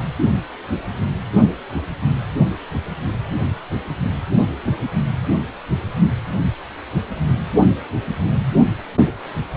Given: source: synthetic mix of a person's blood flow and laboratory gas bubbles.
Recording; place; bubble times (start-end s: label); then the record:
Doppler ultrasound of blood flow; precordium
no bubbles
From the record:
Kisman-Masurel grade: 000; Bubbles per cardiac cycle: 0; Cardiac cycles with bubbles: 0%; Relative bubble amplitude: no bubbles discernible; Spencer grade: 0 (complete lack of bubble signals)